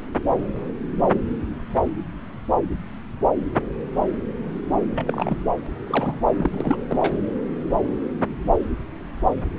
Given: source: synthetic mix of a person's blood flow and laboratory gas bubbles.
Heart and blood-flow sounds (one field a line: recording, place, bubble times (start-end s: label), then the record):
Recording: Doppler ultrasound of blood flow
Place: subclavian vein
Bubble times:
4.95-5.41 s: bubbles
5.87-6.19 s: bubbles
6.36-6.76 s: bubbles
6.89-7.15 s: bubbles
From the record:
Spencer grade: 2 (many but less than half of the cardiac periods contain bubble signals, singularly or in groups)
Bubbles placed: anywhere in the cardiac cycle